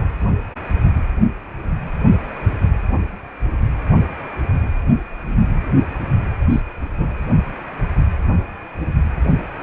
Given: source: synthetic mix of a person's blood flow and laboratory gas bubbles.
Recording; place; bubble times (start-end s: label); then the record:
Doppler ultrasound of blood flow; precordium
6.50-6.61 s: bubbles
6.98-7.14 s: bubbles
From the record:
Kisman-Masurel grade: 112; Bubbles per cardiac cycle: 1 to 2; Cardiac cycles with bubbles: 1 to 10%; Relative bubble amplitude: moderate (0.250 to 0.450); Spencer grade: 1 (occasional bubble signal discernible with the cardiac motion signal, with majority of cardiac periods free of bubbles); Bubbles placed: anywhere in the cardiac cycle